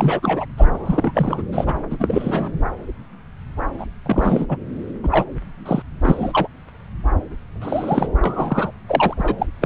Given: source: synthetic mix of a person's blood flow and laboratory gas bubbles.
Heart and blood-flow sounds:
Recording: Doppler ultrasound of blood flow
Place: subclavian vein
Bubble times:
0.00-0.46 s: bubbles
0.57-1.43 s: bubbles
1.52-1.75 s: bubbles
1.90-1.96 s: bubbles
2.00-2.50 s: bubbles
3.79-3.85 s: bubbles
4.05-4.57 s: bubbles
5.03-5.25 s: bubbles
5.66-5.82 s: bubbles
6.02-6.47 s: bubbles
7.62-8.08 s: bubbles
8.21-8.72 s: bubbles
8.87-9.15 s: bubbles
9.17-9.46 s: bubbles
9.61-9.66 s: bubbles
From the record:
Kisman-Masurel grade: 332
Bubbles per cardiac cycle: rolling drumbeat, 9 or more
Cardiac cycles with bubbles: 50 to 99%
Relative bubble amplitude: moderate (0.250 to 0.450)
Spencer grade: 3 (all of the cardiac periods contain showers or single bubble signals, but not dominating or overriding the cardiac motion signals)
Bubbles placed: anywhere in the cardiac cycle

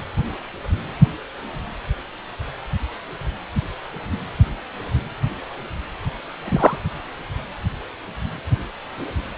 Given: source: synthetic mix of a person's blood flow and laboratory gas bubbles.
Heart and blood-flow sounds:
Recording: Doppler ultrasound of blood flow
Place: precordium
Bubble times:
6.44-6.78 s: bubbles
From the record:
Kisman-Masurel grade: 113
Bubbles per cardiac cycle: 1 to 2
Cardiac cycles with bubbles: 1 to 10%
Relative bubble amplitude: loud (0.450 to 0.775)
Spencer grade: 1 (occasional bubble signal discernible with the cardiac motion signal, with majority of cardiac periods free of bubbles)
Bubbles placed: anywhere in the cardiac cycle

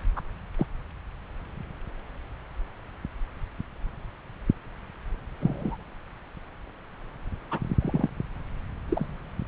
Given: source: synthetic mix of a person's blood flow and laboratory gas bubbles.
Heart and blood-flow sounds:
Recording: Doppler ultrasound of blood flow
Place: subclavian vein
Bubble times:
0.16-0.22 s: bubbles
0.57-0.66 s: bubbles
5.40-5.77 s: bubbles
7.50-7.59 s: bubbles
7.80-8.09 s: bubbles
8.89-9.05 s: bubbles
From the record:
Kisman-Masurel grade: 122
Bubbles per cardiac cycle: 1 to 2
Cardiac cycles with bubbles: 10 to 50%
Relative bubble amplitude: moderate (0.250 to 0.450)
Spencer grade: 2 (many but less than half of the cardiac periods contain bubble signals, singularly or in groups)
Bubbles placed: anywhere in the cardiac cycle

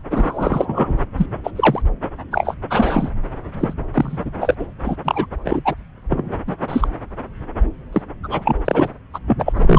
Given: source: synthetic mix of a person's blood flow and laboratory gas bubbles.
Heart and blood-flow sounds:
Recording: Doppler ultrasound of blood flow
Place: subclavian vein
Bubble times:
0.10-0.97 s: bubbles
1.17-1.26 s: bubbles
1.44-1.51 s: bubbles
1.56-1.82 s: bubbles
2.31-2.55 s: bubbles
2.70-3.10 s: bubbles
3.59-3.73 s: bubbles
3.93-4.18 s: bubbles
4.25-4.31 s: bubbles
4.41-4.55 s: bubbles
4.59-4.66 s: bubbles
4.84-4.96 s: bubbles
5.04-5.26 s: bubbles
5.44-5.60 s: bubbles
5.64-5.75 s: bubbles
6.09-6.34 s: bubbles
6.47-6.54 s: bubbles
6.68-6.88 s: bubbles
7.92-8.02 s: bubbles
8.23-8.53 s: bubbles
8.65-8.89 s: bubbles
9.14-9.19 s: bubbles
9.27-9.53 s: bubbles
9.56-9.79 s: bubbles
From the record:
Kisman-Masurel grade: 233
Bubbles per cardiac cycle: several, 3 to 8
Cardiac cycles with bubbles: 50 to 99%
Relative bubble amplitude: loud (0.450 to 0.775)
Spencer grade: 3 (all of the cardiac periods contain showers or single bubble signals, but not dominating or overriding the cardiac motion signals)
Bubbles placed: anywhere in the cardiac cycle

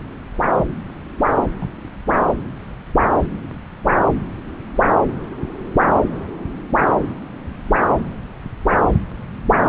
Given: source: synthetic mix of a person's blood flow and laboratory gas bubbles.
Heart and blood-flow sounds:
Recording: Doppler ultrasound of blood flow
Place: subclavian vein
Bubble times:
1.59-1.71 s: bubbles
2.06-2.25 s: bubbles
From the record:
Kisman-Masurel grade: 211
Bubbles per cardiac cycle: several, 3 to 8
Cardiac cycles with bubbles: 1 to 10%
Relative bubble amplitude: barely perceptible (0.100 to 0.250)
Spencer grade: 1 (occasional bubble signal discernible with the cardiac motion signal, with majority of cardiac periods free of bubbles)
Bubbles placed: anywhere in the cardiac cycle

